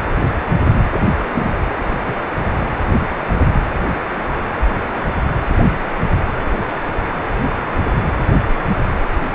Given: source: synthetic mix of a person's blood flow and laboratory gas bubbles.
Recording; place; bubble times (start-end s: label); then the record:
Doppler ultrasound of blood flow; precordium
0.93-1.01 s: bubbles
1.34-1.50 s: bubbles
From the record:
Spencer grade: 1 (occasional bubble signal discernible with the cardiac motion signal, with majority of cardiac periods free of bubbles); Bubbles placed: anywhere in the cardiac cycle